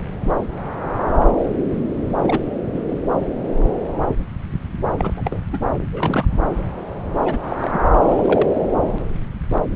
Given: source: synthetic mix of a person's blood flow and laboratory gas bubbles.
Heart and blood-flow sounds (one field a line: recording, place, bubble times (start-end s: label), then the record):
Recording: Doppler ultrasound of blood flow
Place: subclavian vein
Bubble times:
2.23-2.44 s: bubbles
2.74-2.81 s: bubbles
2.88-2.95 s: bubbles
4.98-5.40 s: bubbles
5.52-5.59 s: bubbles
5.92-6.25 s: bubbles
7.25-7.38 s: bubbles
7.42-7.57 s: bubbles
7.60-7.79 s: bubbles
8.08-8.48 s: bubbles
From the record:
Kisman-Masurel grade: 222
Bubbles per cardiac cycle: several, 3 to 8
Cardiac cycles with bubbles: 10 to 50%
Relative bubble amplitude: moderate (0.250 to 0.450)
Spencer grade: 2 (many but less than half of the cardiac periods contain bubble signals, singularly or in groups)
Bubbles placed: anywhere in the cardiac cycle